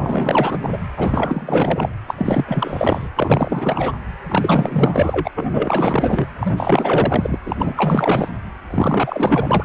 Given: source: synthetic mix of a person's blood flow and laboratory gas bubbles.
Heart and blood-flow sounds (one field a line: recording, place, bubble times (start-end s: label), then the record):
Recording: Doppler ultrasound of blood flow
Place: precordium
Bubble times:
0.00-0.59 s: bubbles
0.62-0.69 s: bubbles
0.71-0.79 s: bubbles
0.96-1.89 s: bubbles
2.07-2.15 s: bubbles
2.17-3.08 s: bubbles
3.16-3.97 s: bubbles
4.29-5.31 s: bubbles
5.35-6.28 s: bubbles
6.40-7.39 s: bubbles
7.46-7.74 s: bubbles
7.77-8.29 s: bubbles
8.70-9.64 s: bubbles
From the record:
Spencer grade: 4 (maximum detectable bubble signal sounding continuously throughout systole and diastole of every cardiac period, and overriding the amplitude of the normal cardiac signals)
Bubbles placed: anywhere in the cardiac cycle